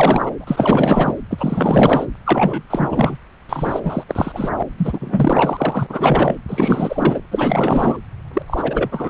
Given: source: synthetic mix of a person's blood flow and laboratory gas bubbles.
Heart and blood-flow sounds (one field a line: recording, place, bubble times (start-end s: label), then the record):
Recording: Doppler ultrasound of blood flow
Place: subclavian vein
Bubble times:
0.00-0.32 s: bubbles
0.39-0.44 s: bubbles
0.47-1.15 s: bubbles
1.30-2.06 s: bubbles
2.25-2.62 s: bubbles
2.70-2.89 s: bubbles
2.91-3.17 s: bubbles
3.49-3.80 s: bubbles
3.82-4.03 s: bubbles
4.08-4.63 s: bubbles
4.77-5.86 s: bubbles
5.89-6.35 s: bubbles
6.49-7.20 s: bubbles
7.30-7.98 s: bubbles
8.33-8.42 s: bubbles
8.47-9.09 s: bubbles
From the record:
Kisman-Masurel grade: 444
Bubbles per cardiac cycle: continuous sound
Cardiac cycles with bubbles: 100%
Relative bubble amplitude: maximal (0.775 to 0.999)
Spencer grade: 4 (maximum detectable bubble signal sounding continuously throughout systole and diastole of every cardiac period, and overriding the amplitude of the normal cardiac signals)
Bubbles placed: anywhere in the cardiac cycle